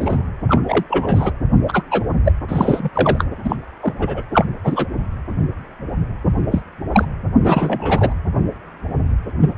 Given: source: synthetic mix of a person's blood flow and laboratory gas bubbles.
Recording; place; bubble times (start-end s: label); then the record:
Doppler ultrasound of blood flow; precordium
0.00-0.27 s: bubbles
0.49-0.61 s: bubbles
0.68-0.84 s: bubbles
0.90-1.31 s: bubbles
1.68-1.84 s: bubbles
1.90-2.04 s: bubbles
2.25-2.32 s: bubbles
2.48-2.90 s: bubbles
2.95-3.25 s: bubbles
3.44-3.56 s: bubbles
3.81-3.94 s: bubbles
3.98-4.23 s: bubbles
4.33-4.46 s: bubbles
4.64-4.87 s: bubbles
6.51-6.62 s: bubbles
6.93-7.05 s: bubbles
7.43-8.14 s: bubbles
9.39-9.54 s: bubbles
From the record:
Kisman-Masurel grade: 233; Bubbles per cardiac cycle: several, 3 to 8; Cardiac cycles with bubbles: 50 to 99%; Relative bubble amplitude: loud (0.450 to 0.775); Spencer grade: 3 (all of the cardiac periods contain showers or single bubble signals, but not dominating or overriding the cardiac motion signals); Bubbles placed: anywhere in the cardiac cycle